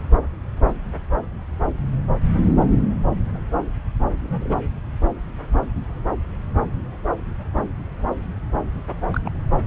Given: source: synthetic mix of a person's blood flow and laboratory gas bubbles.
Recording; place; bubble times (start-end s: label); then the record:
Doppler ultrasound of blood flow; subclavian vein
4.21-4.57 s: bubbles
9.13-9.21 s: bubbles
9.25-9.30 s: bubbles
From the record:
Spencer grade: 1 (occasional bubble signal discernible with the cardiac motion signal, with majority of cardiac periods free of bubbles); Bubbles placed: anywhere in the cardiac cycle